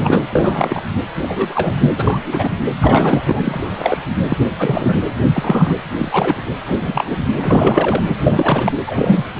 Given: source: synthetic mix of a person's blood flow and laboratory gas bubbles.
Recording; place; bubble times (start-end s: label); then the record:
Doppler ultrasound of blood flow; precordium
0.00-0.23 s: bubbles
0.30-0.82 s: bubbles
1.22-1.92 s: bubbles
1.97-2.19 s: bubbles
2.24-2.48 s: bubbles
2.80-4.06 s: bubbles
4.29-4.38 s: bubbles
4.58-5.00 s: bubbles
5.27-5.74 s: bubbles
5.98-6.36 s: bubbles
6.67-7.17 s: bubbles
7.41-8.04 s: bubbles
8.09-8.16 s: bubbles
8.20-8.72 s: bubbles
8.86-9.25 s: bubbles
From the record:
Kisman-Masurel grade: 243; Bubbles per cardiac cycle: several, 3 to 8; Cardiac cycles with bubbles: 100%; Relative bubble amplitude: loud (0.450 to 0.775); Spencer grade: 3 (all of the cardiac periods contain showers or single bubble signals, but not dominating or overriding the cardiac motion signals); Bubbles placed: anywhere in the cardiac cycle